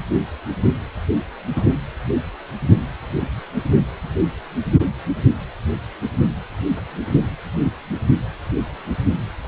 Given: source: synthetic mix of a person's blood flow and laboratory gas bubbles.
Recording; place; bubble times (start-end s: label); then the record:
Doppler ultrasound of blood flow; precordium
1.55-1.65 s: bubbles
From the record:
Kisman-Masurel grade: 123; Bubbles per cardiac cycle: 1 to 2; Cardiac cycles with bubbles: 10 to 50%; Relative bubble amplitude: loud (0.450 to 0.775); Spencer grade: 2 (many but less than half of the cardiac periods contain bubble signals, singularly or in groups); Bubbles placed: anywhere in the cardiac cycle